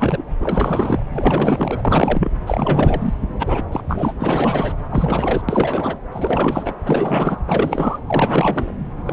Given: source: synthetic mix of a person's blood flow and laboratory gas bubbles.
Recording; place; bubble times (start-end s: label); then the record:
Doppler ultrasound of blood flow; subclavian vein
0.00-0.24 s: bubbles
0.39-1.05 s: bubbles
1.09-1.82 s: bubbles
1.85-2.35 s: bubbles
2.46-3.13 s: bubbles
3.40-3.63 s: bubbles
3.71-4.13 s: bubbles
4.20-4.74 s: bubbles
4.91-5.42 s: bubbles
5.48-5.97 s: bubbles
6.12-6.74 s: bubbles
6.85-7.39 s: bubbles
7.47-8.00 s: bubbles
8.06-8.74 s: bubbles
9.04-9.13 s: bubbles
From the record:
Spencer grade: 4 (maximum detectable bubble signal sounding continuously throughout systole and diastole of every cardiac period, and overriding the amplitude of the normal cardiac signals); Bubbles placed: anywhere in the cardiac cycle